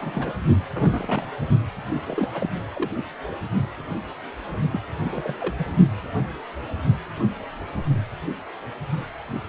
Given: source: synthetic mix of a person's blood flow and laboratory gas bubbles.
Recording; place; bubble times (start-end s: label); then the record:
Doppler ultrasound of blood flow; precordium
0.00-0.32 s: bubbles
0.73-1.26 s: bubbles
2.05-2.27 s: bubbles
2.34-2.49 s: bubbles
2.74-3.04 s: bubbles
4.72-4.82 s: bubbles
5.04-5.35 s: bubbles
5.40-5.54 s: bubbles
5.58-5.66 s: bubbles
From the record:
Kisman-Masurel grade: 221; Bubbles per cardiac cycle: several, 3 to 8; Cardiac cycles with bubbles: 10 to 50%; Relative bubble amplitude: barely perceptible (0.100 to 0.250); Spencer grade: 2 (many but less than half of the cardiac periods contain bubble signals, singularly or in groups); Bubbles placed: only in the low amplitude regions of the cardiac cycle